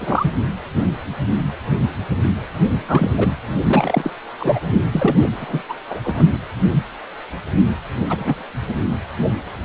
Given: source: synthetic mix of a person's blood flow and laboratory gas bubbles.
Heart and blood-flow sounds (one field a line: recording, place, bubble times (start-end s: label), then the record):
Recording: Doppler ultrasound of blood flow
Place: precordium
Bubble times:
0.00-0.31 s: bubbles
2.88-3.11 s: bubbles
3.17-3.37 s: bubbles
3.67-4.12 s: bubbles
4.40-4.60 s: bubbles
4.92-5.19 s: bubbles
5.21-5.29 s: bubbles
5.41-5.62 s: bubbles
5.69-5.73 s: bubbles
5.90-6.00 s: bubbles
6.04-6.24 s: bubbles
8.09-8.44 s: bubbles
8.68-8.75 s: bubbles
From the record:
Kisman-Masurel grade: 233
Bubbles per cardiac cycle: several, 3 to 8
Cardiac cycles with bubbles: 50 to 99%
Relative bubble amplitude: loud (0.450 to 0.775)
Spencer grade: 3 (all of the cardiac periods contain showers or single bubble signals, but not dominating or overriding the cardiac motion signals)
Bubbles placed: anywhere in the cardiac cycle